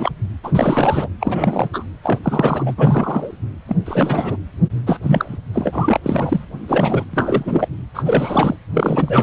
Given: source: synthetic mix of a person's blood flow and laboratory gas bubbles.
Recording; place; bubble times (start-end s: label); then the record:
Doppler ultrasound of blood flow; precordium
0.00-0.12 s: bubbles
0.44-1.08 s: bubbles
1.20-1.69 s: bubbles
1.73-1.84 s: bubbles
2.03-2.19 s: bubbles
2.23-2.75 s: bubbles
2.77-3.31 s: bubbles
3.68-3.77 s: bubbles
3.85-4.37 s: bubbles
4.86-5.38 s: bubbles
5.53-6.00 s: bubbles
6.03-6.45 s: bubbles
6.68-7.04 s: bubbles
7.13-7.68 s: bubbles
7.94-8.57 s: bubbles
8.73-9.23 s: bubbles
From the record:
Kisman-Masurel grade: 343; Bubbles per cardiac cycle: rolling drumbeat, 9 or more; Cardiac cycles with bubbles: 100%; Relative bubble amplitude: loud (0.450 to 0.775); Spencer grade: 3 (all of the cardiac periods contain showers or single bubble signals, but not dominating or overriding the cardiac motion signals); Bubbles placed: anywhere in the cardiac cycle